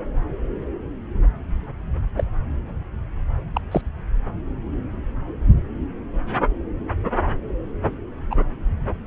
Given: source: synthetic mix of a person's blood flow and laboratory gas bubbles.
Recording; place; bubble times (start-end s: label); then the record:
Doppler ultrasound of blood flow; subclavian vein
2.17-2.24 s: bubbles
3.54-3.61 s: bubbles
3.71-3.82 s: bubbles
8.30-8.35 s: bubbles
From the record:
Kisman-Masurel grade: 122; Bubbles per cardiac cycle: 1 to 2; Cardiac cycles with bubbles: 10 to 50%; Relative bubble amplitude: moderate (0.250 to 0.450); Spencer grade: 2 (many but less than half of the cardiac periods contain bubble signals, singularly or in groups); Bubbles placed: anywhere in the cardiac cycle